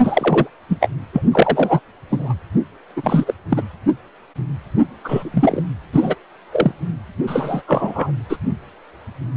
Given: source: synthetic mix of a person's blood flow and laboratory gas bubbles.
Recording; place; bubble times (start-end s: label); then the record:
Doppler ultrasound of blood flow; precordium
0.03-0.50 s: bubbles
0.69-0.78 s: bubbles
0.80-0.88 s: bubbles
1.12-1.22 s: bubbles
1.31-1.80 s: bubbles
2.10-2.34 s: bubbles
2.96-3.34 s: bubbles
3.49-3.62 s: bubbles
5.04-5.62 s: bubbles
5.92-6.15 s: bubbles
6.51-6.72 s: bubbles
7.27-7.62 s: bubbles
7.67-8.11 s: bubbles
8.29-8.37 s: bubbles
From the record:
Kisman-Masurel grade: 233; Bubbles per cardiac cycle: several, 3 to 8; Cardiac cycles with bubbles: 50 to 99%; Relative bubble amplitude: loud (0.450 to 0.775); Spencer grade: 3 (all of the cardiac periods contain showers or single bubble signals, but not dominating or overriding the cardiac motion signals); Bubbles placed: anywhere in the cardiac cycle